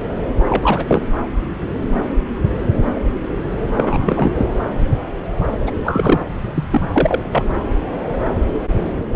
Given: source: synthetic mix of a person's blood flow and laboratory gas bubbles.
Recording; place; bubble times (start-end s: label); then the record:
Doppler ultrasound of blood flow; subclavian vein
0.49-1.02 s: bubbles
3.75-4.32 s: bubbles
4.35-4.46 s: bubbles
5.67-5.71 s: bubbles
5.84-6.33 s: bubbles
6.54-6.63 s: bubbles
6.70-6.88 s: bubbles
6.92-7.21 s: bubbles
7.31-7.45 s: bubbles
9.13-9.16 s: bubbles
From the record:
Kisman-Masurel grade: 223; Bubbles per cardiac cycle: several, 3 to 8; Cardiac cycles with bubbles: 10 to 50%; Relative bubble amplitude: loud (0.450 to 0.775); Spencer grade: 2 (many but less than half of the cardiac periods contain bubble signals, singularly or in groups); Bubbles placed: anywhere in the cardiac cycle